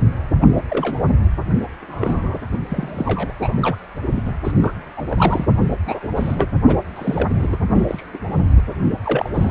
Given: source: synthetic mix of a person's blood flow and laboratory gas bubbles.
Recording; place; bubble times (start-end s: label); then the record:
Doppler ultrasound of blood flow; precordium
0.41-0.47 s: bubbles
0.55-0.62 s: bubbles
0.69-1.02 s: bubbles
1.81-2.38 s: bubbles
2.68-3.32 s: bubbles
3.40-3.76 s: bubbles
4.15-4.33 s: bubbles
4.44-4.51 s: bubbles
4.60-4.72 s: bubbles
4.97-5.04 s: bubbles
5.09-5.47 s: bubbles
5.87-6.09 s: bubbles
6.15-6.47 s: bubbles
6.67-6.78 s: bubbles
6.96-7.57 s: bubbles
7.74-8.03 s: bubbles
8.13-8.17 s: bubbles
8.56-8.62 s: bubbles
9.04-9.29 s: bubbles
9.34-9.51 s: bubbles
From the record:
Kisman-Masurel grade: 232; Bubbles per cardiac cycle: several, 3 to 8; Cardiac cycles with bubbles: 50 to 99%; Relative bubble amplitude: moderate (0.250 to 0.450); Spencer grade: 3 (all of the cardiac periods contain showers or single bubble signals, but not dominating or overriding the cardiac motion signals); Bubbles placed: anywhere in the cardiac cycle